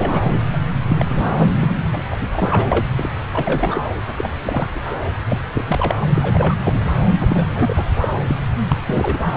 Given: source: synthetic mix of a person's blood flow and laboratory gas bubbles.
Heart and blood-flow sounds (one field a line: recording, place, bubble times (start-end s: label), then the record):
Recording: Doppler ultrasound of blood flow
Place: subclavian vein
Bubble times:
0.00-0.41 s: bubbles
0.52-0.59 s: bubbles
0.89-1.05 s: bubbles
1.09-1.48 s: bubbles
1.61-1.82 s: bubbles
1.93-2.04 s: bubbles
2.10-2.17 s: bubbles
2.19-2.28 s: bubbles
2.32-2.65 s: bubbles
2.68-2.85 s: bubbles
2.96-3.10 s: bubbles
3.32-3.83 s: bubbles
4.17-4.31 s: bubbles
4.45-4.66 s: bubbles
4.75-4.95 s: bubbles
5.03-5.09 s: bubbles
5.29-5.40 s: bubbles
5.54-5.65 s: bubbles
5.68-5.96 s: bubbles
5.99-6.09 s: bubbles
6.14-6.61 s: bubbles
6.65-6.84 s: bubbles
7.19-7.85 s: bubbles
8.00-8.08 s: bubbles
8.27-8.35 s: bubbles
8.68-8.82 s: bubbles
8.87-9.37 s: bubbles
From the record:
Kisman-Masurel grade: 342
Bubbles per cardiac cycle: rolling drumbeat, 9 or more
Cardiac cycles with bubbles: 100%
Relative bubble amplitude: moderate (0.250 to 0.450)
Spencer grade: 3 (all of the cardiac periods contain showers or single bubble signals, but not dominating or overriding the cardiac motion signals)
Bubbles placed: anywhere in the cardiac cycle